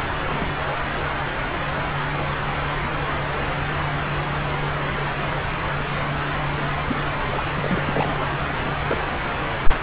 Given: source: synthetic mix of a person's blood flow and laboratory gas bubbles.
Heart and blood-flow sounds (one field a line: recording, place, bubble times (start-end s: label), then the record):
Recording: Doppler ultrasound of blood flow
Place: subclavian vein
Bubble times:
0.00-0.04 s: bubbles
0.27-0.52 s: bubbles
6.88-6.96 s: bubbles
7.27-7.43 s: bubbles
7.56-8.24 s: bubbles
8.31-8.38 s: bubbles
8.48-8.53 s: bubbles
8.60-8.71 s: bubbles
8.85-8.97 s: bubbles
From the record:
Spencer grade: 2 (many but less than half of the cardiac periods contain bubble signals, singularly or in groups)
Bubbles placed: anywhere in the cardiac cycle